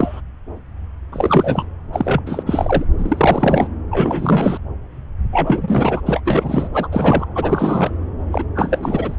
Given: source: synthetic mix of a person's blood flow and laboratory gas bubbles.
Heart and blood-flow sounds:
Doppler ultrasound of blood flow; subclavian vein
0.00-0.21 s: bubbles
1.12-1.66 s: bubbles
1.93-2.21 s: bubbles
2.26-2.43 s: bubbles
2.46-2.85 s: bubbles
2.98-3.68 s: bubbles
3.91-4.57 s: bubbles
5.32-6.01 s: bubbles
6.05-6.21 s: bubbles
6.24-6.68 s: bubbles
6.73-6.88 s: bubbles
6.92-7.26 s: bubbles
7.34-7.93 s: bubbles
8.32-8.44 s: bubbles
8.54-9.16 s: bubbles
From the record:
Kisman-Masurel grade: 333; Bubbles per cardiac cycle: rolling drumbeat, 9 or more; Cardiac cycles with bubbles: 50 to 99%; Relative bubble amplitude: loud (0.450 to 0.775); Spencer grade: 3 (all of the cardiac periods contain showers or single bubble signals, but not dominating or overriding the cardiac motion signals); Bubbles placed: anywhere in the cardiac cycle

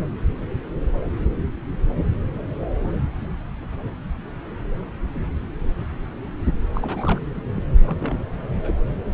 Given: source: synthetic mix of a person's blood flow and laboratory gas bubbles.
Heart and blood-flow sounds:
Doppler ultrasound of blood flow; subclavian vein
6.73-7.21 s: bubbles
7.33-7.42 s: bubbles
7.55-7.64 s: bubbles
7.87-7.97 s: bubbles
8.00-8.17 s: bubbles
8.56-8.76 s: bubbles
From the record:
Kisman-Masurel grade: 221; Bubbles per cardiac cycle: several, 3 to 8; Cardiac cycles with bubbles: 10 to 50%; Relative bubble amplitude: barely perceptible (0.100 to 0.250); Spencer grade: 2 (many but less than half of the cardiac periods contain bubble signals, singularly or in groups); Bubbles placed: anywhere in the cardiac cycle

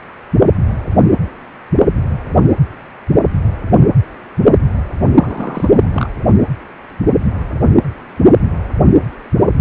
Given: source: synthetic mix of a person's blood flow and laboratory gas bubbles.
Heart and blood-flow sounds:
Doppler ultrasound of blood flow; precordium
5.13-6.09 s: bubbles
From the record:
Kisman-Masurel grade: 212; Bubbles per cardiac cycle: several, 3 to 8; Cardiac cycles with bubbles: 1 to 10%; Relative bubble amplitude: moderate (0.250 to 0.450); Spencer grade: 1 (occasional bubble signal discernible with the cardiac motion signal, with majority of cardiac periods free of bubbles); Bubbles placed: anywhere in the cardiac cycle

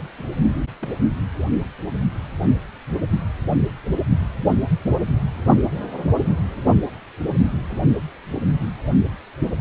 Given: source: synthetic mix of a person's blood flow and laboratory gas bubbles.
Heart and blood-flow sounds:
Doppler ultrasound of blood flow; precordium
0.18-0.29 s: bubbles
0.82-0.88 s: bubbles
From the record:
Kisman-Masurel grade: 111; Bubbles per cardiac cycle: 1 to 2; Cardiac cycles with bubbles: 1 to 10%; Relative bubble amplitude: barely perceptible (0.100 to 0.250); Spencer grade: 1 (occasional bubble signal discernible with the cardiac motion signal, with majority of cardiac periods free of bubbles); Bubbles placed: only in the low amplitude regions of the cardiac cycle

